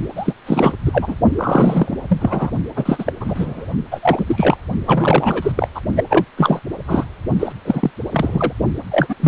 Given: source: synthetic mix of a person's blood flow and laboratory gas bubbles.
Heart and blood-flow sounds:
Doppler ultrasound of blood flow; precordium
0.15-0.34 s: bubbles
0.46-0.73 s: bubbles
0.85-1.16 s: bubbles
1.38-1.97 s: bubbles
2.08-2.51 s: bubbles
2.76-3.12 s: bubbles
3.21-3.66 s: bubbles
3.91-4.58 s: bubbles
4.87-5.52 s: bubbles
5.57-5.68 s: bubbles
5.75-5.80 s: bubbles
5.96-6.04 s: bubbles
6.09-6.25 s: bubbles
6.37-6.59 s: bubbles
6.87-7.05 s: bubbles
7.39-7.52 s: bubbles
7.65-7.91 s: bubbles
8.12-8.53 s: bubbles
8.91-9.15 s: bubbles
9.20-9.28 s: bubbles
From the record:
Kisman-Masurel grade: 343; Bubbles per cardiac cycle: rolling drumbeat, 9 or more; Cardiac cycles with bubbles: 100%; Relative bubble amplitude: loud (0.450 to 0.775); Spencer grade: 3 (all of the cardiac periods contain showers or single bubble signals, but not dominating or overriding the cardiac motion signals); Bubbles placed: only in the low amplitude regions of the cardiac cycle

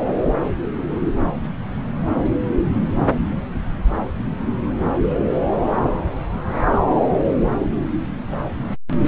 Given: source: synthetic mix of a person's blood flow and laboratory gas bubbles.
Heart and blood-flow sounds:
Doppler ultrasound of blood flow; subclavian vein
no bubbles
From the record:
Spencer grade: 0 (complete lack of bubble signals)

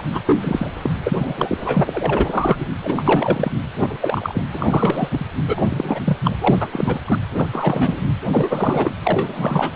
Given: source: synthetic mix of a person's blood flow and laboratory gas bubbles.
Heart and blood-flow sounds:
Doppler ultrasound of blood flow; precordium
0.00-0.02 s: bubbles
0.11-0.21 s: bubbles
0.27-0.37 s: bubbles
0.41-0.67 s: bubbles
0.82-0.90 s: bubbles
1.04-1.58 s: bubbles
1.65-2.67 s: bubbles
2.80-3.50 s: bubbles
3.80-3.97 s: bubbles
4.01-4.43 s: bubbles
4.52-5.26 s: bubbles
5.47-5.62 s: bubbles
5.69-6.03 s: bubbles
6.06-6.17 s: bubbles
6.24-6.37 s: bubbles
6.41-6.68 s: bubbles
6.72-6.99 s: bubbles
7.07-7.21 s: bubbles
7.31-7.49 s: bubbles
7.53-8.02 s: bubbles
8.29-8.94 s: bubbles
9.03-9.72 s: bubbles
From the record:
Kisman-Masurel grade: 333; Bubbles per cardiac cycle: rolling drumbeat, 9 or more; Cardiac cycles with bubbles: 50 to 99%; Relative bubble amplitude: loud (0.450 to 0.775); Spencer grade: 3 (all of the cardiac periods contain showers or single bubble signals, but not dominating or overriding the cardiac motion signals); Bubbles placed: anywhere in the cardiac cycle

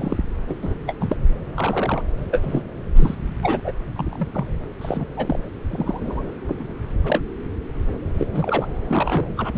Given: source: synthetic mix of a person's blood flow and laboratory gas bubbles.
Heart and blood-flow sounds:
Doppler ultrasound of blood flow; subclavian vein
0.00-0.17 s: bubbles
0.48-0.59 s: bubbles
0.62-0.74 s: bubbles
0.87-0.93 s: bubbles
1.00-1.16 s: bubbles
1.56-2.03 s: bubbles
2.31-2.64 s: bubbles
2.96-3.15 s: bubbles
3.42-3.60 s: bubbles
3.64-3.72 s: bubbles
3.96-4.28 s: bubbles
4.32-4.46 s: bubbles
4.81-5.06 s: bubbles
5.17-5.39 s: bubbles
5.71-6.22 s: bubbles
6.48-6.72 s: bubbles
7.04-7.20 s: bubbles
8.19-8.27 s: bubbles
8.31-8.67 s: bubbles
8.89-9.25 s: bubbles
9.37-9.58 s: bubbles
From the record:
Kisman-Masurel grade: 242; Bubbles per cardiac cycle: several, 3 to 8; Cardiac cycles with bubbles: 100%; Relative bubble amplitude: moderate (0.250 to 0.450); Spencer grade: 3 (all of the cardiac periods contain showers or single bubble signals, but not dominating or overriding the cardiac motion signals); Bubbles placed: anywhere in the cardiac cycle

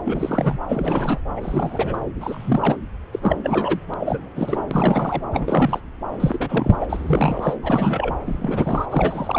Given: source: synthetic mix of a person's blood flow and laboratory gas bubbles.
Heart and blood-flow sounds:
Doppler ultrasound of blood flow; subclavian vein
0.05-0.58 s: bubbles
0.68-1.21 s: bubbles
1.35-2.00 s: bubbles
2.19-2.77 s: bubbles
3.12-3.19 s: bubbles
3.21-3.37 s: bubbles
3.42-3.80 s: bubbles
3.90-3.94 s: bubbles
3.99-4.28 s: bubbles
4.36-4.66 s: bubbles
4.71-5.23 s: bubbles
5.32-5.80 s: bubbles
6.19-6.76 s: bubbles
6.80-7.57 s: bubbles
7.62-8.15 s: bubbles
8.26-8.86 s: bubbles
8.89-9.39 s: bubbles
From the record:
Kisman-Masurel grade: 343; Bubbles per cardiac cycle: rolling drumbeat, 9 or more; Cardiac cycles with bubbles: 100%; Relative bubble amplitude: loud (0.450 to 0.775); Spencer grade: 3 (all of the cardiac periods contain showers or single bubble signals, but not dominating or overriding the cardiac motion signals); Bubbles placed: anywhere in the cardiac cycle

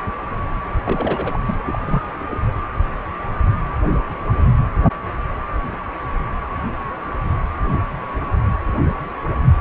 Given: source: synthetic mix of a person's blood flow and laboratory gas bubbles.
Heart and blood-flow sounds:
Doppler ultrasound of blood flow; precordium
0.83-1.40 s: bubbles
1.47-1.57 s: bubbles
1.66-1.82 s: bubbles
1.85-2.01 s: bubbles
2.19-2.39 s: bubbles
From the record:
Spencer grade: 2 (many but less than half of the cardiac periods contain bubble signals, singularly or in groups); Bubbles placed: anywhere in the cardiac cycle

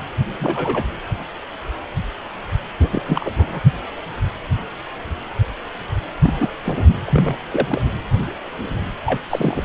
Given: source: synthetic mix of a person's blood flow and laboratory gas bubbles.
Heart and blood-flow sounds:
Doppler ultrasound of blood flow; precordium
0.40-0.84 s: bubbles
2.80-3.04 s: bubbles
3.06-3.31 s: bubbles
3.36-3.60 s: bubbles
6.23-6.49 s: bubbles
6.65-6.73 s: bubbles
7.07-7.37 s: bubbles
7.50-7.82 s: bubbles
9.05-9.20 s: bubbles
9.29-9.61 s: bubbles
From the record:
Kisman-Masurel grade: 232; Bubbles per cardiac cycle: several, 3 to 8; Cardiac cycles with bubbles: 50 to 99%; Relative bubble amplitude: moderate (0.250 to 0.450); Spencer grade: 3 (all of the cardiac periods contain showers or single bubble signals, but not dominating or overriding the cardiac motion signals); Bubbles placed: anywhere in the cardiac cycle

